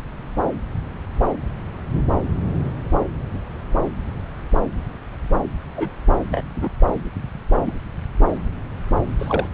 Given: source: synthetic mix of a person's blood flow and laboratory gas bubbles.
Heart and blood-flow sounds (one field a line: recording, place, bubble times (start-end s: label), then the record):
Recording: Doppler ultrasound of blood flow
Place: subclavian vein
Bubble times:
5.76-5.88 s: bubbles
6.31-6.44 s: bubbles
6.55-6.69 s: bubbles
7.58-7.73 s: bubbles
9.19-9.48 s: bubbles
From the record:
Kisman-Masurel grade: 122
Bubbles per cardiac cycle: 1 to 2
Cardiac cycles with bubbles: 10 to 50%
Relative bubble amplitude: moderate (0.250 to 0.450)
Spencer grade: 2 (many but less than half of the cardiac periods contain bubble signals, singularly or in groups)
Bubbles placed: anywhere in the cardiac cycle